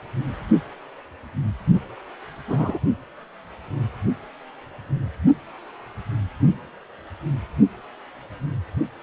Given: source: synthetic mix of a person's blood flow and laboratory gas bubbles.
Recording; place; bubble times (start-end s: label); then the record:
Doppler ultrasound of blood flow; precordium
2.48-2.79 s: bubbles
From the record:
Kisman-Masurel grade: 113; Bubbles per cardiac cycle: 1 to 2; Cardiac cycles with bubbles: 1 to 10%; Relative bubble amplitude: loud (0.450 to 0.775); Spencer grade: 1 (occasional bubble signal discernible with the cardiac motion signal, with majority of cardiac periods free of bubbles); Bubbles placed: only in the low amplitude regions of the cardiac cycle